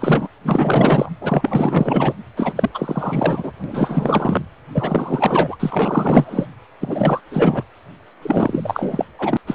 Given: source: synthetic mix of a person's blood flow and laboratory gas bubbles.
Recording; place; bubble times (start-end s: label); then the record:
Doppler ultrasound of blood flow; precordium
0.00-0.28 s: bubbles
0.43-1.10 s: bubbles
1.21-2.13 s: bubbles
2.36-2.52 s: bubbles
2.55-2.69 s: bubbles
2.74-3.52 s: bubbles
3.64-4.45 s: bubbles
4.74-5.56 s: bubbles
5.60-6.47 s: bubbles
6.80-7.21 s: bubbles
7.31-7.62 s: bubbles
8.21-9.05 s: bubbles
9.18-9.37 s: bubbles
9.46-9.55 s: bubbles
From the record:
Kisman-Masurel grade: 444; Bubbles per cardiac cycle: continuous sound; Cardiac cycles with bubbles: 100%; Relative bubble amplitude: maximal (0.775 to 0.999); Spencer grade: 4 (maximum detectable bubble signal sounding continuously throughout systole and diastole of every cardiac period, and overriding the amplitude of the normal cardiac signals); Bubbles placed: anywhere in the cardiac cycle